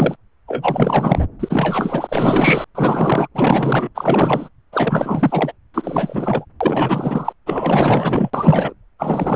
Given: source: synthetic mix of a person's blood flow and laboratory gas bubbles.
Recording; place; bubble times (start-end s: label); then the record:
Doppler ultrasound of blood flow; subclavian vein
0.00-0.16 s: bubbles
0.47-1.24 s: bubbles
1.39-2.64 s: bubbles
2.75-3.28 s: bubbles
3.34-3.89 s: bubbles
3.94-4.48 s: bubbles
4.72-5.52 s: bubbles
5.74-6.45 s: bubbles
6.60-7.33 s: bubbles
7.46-8.30 s: bubbles
8.33-8.73 s: bubbles
8.98-9.36 s: bubbles
From the record:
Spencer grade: 4 (maximum detectable bubble signal sounding continuously throughout systole and diastole of every cardiac period, and overriding the amplitude of the normal cardiac signals); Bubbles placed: anywhere in the cardiac cycle